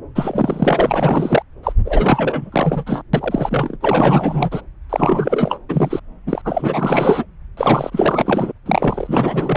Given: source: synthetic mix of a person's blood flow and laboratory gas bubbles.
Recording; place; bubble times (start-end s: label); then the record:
Doppler ultrasound of blood flow; subclavian vein
0.15-1.43 s: bubbles
1.63-1.73 s: bubbles
1.84-3.02 s: bubbles
3.13-3.78 s: bubbles
3.80-4.61 s: bubbles
4.89-5.58 s: bubbles
5.68-6.00 s: bubbles
6.26-6.42 s: bubbles
6.45-7.25 s: bubbles
7.57-8.52 s: bubbles
8.66-9.57 s: bubbles
From the record:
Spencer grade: 4 (maximum detectable bubble signal sounding continuously throughout systole and diastole of every cardiac period, and overriding the amplitude of the normal cardiac signals); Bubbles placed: anywhere in the cardiac cycle